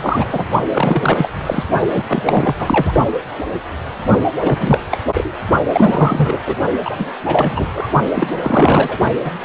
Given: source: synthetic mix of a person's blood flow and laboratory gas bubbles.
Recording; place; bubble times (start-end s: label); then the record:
Doppler ultrasound of blood flow; precordium
0.01-0.44 s: bubbles
0.73-1.30 s: bubbles
1.44-1.64 s: bubbles
1.93-2.02 s: bubbles
2.06-2.55 s: bubbles
2.59-2.92 s: bubbles
4.41-4.80 s: bubbles
4.91-4.98 s: bubbles
5.14-5.31 s: bubbles
5.73-6.38 s: bubbles
6.46-6.55 s: bubbles
6.84-6.96 s: bubbles
6.98-7.13 s: bubbles
7.25-7.67 s: bubbles
7.74-7.88 s: bubbles
8.15-8.38 s: bubbles
8.41-8.98 s: bubbles
9.03-9.13 s: bubbles
9.24-9.33 s: bubbles
From the record:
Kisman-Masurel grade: 333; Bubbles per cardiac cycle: rolling drumbeat, 9 or more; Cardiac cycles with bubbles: 50 to 99%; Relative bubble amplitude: loud (0.450 to 0.775); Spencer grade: 3 (all of the cardiac periods contain showers or single bubble signals, but not dominating or overriding the cardiac motion signals); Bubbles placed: only in the low amplitude regions of the cardiac cycle